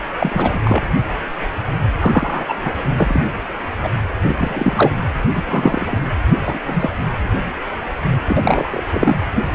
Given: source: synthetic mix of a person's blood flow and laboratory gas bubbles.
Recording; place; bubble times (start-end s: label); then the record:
Doppler ultrasound of blood flow; precordium
0.18-0.60 s: bubbles
0.64-0.84 s: bubbles
2.00-2.55 s: bubbles
2.65-2.71 s: bubbles
2.98-3.24 s: bubbles
3.83-3.89 s: bubbles
4.24-4.34 s: bubbles
4.37-4.92 s: bubbles
5.34-5.42 s: bubbles
5.47-5.97 s: bubbles
6.46-6.58 s: bubbles
6.67-6.89 s: bubbles
8.27-8.83 s: bubbles
8.92-9.22 s: bubbles
From the record:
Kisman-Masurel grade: 233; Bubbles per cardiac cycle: several, 3 to 8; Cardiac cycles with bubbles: 50 to 99%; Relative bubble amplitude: loud (0.450 to 0.775); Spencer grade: 3 (all of the cardiac periods contain showers or single bubble signals, but not dominating or overriding the cardiac motion signals); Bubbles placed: anywhere in the cardiac cycle